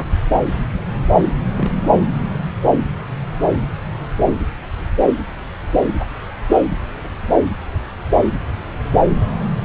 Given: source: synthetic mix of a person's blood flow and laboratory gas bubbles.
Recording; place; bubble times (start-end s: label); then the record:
Doppler ultrasound of blood flow; subclavian vein
1.56-1.71 s: bubbles
From the record:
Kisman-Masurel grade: 112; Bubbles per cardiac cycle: 1 to 2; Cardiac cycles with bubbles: 1 to 10%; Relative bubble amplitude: moderate (0.250 to 0.450); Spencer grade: 1 (occasional bubble signal discernible with the cardiac motion signal, with majority of cardiac periods free of bubbles); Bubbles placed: anywhere in the cardiac cycle